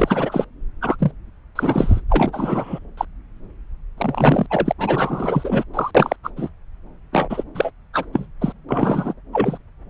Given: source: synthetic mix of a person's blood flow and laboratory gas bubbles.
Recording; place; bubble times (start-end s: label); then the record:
Doppler ultrasound of blood flow; subclavian vein
0.00-0.45 s: bubbles
0.81-0.96 s: bubbles
0.98-1.11 s: bubbles
1.55-2.00 s: bubbles
2.09-2.79 s: bubbles
2.97-3.05 s: bubbles
3.97-4.46 s: bubbles
4.50-4.72 s: bubbles
4.78-5.63 s: bubbles
5.74-5.91 s: bubbles
5.95-6.16 s: bubbles
6.24-6.30 s: bubbles
6.36-6.50 s: bubbles
7.12-7.43 s: bubbles
7.54-7.71 s: bubbles
7.93-8.05 s: bubbles
8.12-8.27 s: bubbles
8.40-8.53 s: bubbles
8.69-9.13 s: bubbles
9.32-9.57 s: bubbles
From the record:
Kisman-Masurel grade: 343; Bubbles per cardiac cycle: rolling drumbeat, 9 or more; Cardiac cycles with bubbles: 100%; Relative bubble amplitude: loud (0.450 to 0.775); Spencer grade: 3 (all of the cardiac periods contain showers or single bubble signals, but not dominating or overriding the cardiac motion signals); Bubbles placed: anywhere in the cardiac cycle